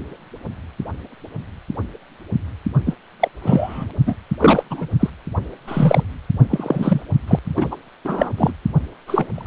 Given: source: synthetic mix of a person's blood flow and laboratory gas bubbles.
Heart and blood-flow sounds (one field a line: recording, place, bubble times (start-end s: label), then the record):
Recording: Doppler ultrasound of blood flow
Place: precordium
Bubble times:
2.86-2.94 s: bubbles
3.19-3.29 s: bubbles
3.42-3.85 s: bubbles
4.05-4.15 s: bubbles
4.39-4.63 s: bubbles
4.70-4.87 s: bubbles
5.00-5.10 s: bubbles
5.67-6.04 s: bubbles
6.50-7.01 s: bubbles
7.28-7.39 s: bubbles
7.56-7.76 s: bubbles
8.05-8.30 s: bubbles
8.37-8.53 s: bubbles
9.07-9.27 s: bubbles
9.33-9.47 s: bubbles
From the record:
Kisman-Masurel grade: 233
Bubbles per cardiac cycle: several, 3 to 8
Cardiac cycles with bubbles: 50 to 99%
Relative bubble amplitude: loud (0.450 to 0.775)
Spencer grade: 3 (all of the cardiac periods contain showers or single bubble signals, but not dominating or overriding the cardiac motion signals)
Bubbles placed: only in the low amplitude regions of the cardiac cycle